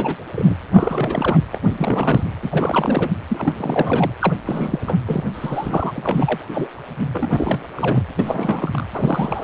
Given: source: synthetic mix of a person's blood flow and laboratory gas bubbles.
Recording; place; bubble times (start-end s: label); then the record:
Doppler ultrasound of blood flow; precordium
0.00-0.17 s: bubbles
0.35-0.55 s: bubbles
0.73-1.38 s: bubbles
1.52-1.61 s: bubbles
1.78-2.24 s: bubbles
2.42-3.11 s: bubbles
3.28-4.12 s: bubbles
4.19-4.35 s: bubbles
4.46-4.79 s: bubbles
4.87-4.97 s: bubbles
5.06-5.23 s: bubbles
5.33-6.47 s: bubbles
6.52-6.68 s: bubbles
7.12-7.63 s: bubbles
7.75-8.03 s: bubbles
8.19-8.86 s: bubbles
8.94-9.44 s: bubbles
From the record:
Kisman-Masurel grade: 342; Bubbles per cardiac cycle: rolling drumbeat, 9 or more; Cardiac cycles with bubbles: 100%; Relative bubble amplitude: moderate (0.250 to 0.450); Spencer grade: 3 (all of the cardiac periods contain showers or single bubble signals, but not dominating or overriding the cardiac motion signals); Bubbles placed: anywhere in the cardiac cycle